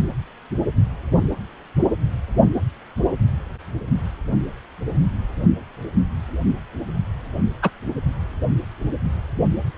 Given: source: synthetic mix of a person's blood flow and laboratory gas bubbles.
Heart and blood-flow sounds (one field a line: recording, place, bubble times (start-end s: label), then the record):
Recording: Doppler ultrasound of blood flow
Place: precordium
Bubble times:
7.62-7.70 s: bubbles
From the record:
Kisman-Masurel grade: 113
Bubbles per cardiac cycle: 1 to 2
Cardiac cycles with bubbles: 1 to 10%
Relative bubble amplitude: loud (0.450 to 0.775)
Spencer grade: 1 (occasional bubble signal discernible with the cardiac motion signal, with majority of cardiac periods free of bubbles)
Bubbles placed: only in the low amplitude regions of the cardiac cycle